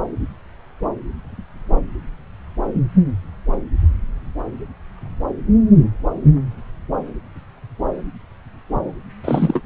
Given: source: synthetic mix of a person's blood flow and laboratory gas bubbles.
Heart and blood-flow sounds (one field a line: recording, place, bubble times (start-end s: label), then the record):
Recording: Doppler ultrasound of blood flow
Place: subclavian vein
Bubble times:
9.23-9.62 s: bubbles
From the record:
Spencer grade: 1 (occasional bubble signal discernible with the cardiac motion signal, with majority of cardiac periods free of bubbles)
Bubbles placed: anywhere in the cardiac cycle